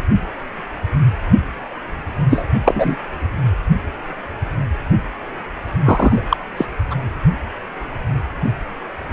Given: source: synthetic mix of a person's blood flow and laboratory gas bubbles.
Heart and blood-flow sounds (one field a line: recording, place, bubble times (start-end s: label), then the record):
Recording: Doppler ultrasound of blood flow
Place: precordium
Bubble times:
2.30-2.46 s: bubbles
2.64-2.98 s: bubbles
5.84-6.23 s: bubbles
6.29-6.37 s: bubbles
6.56-6.66 s: bubbles
6.90-6.96 s: bubbles
From the record:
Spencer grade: 2 (many but less than half of the cardiac periods contain bubble signals, singularly or in groups)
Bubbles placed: anywhere in the cardiac cycle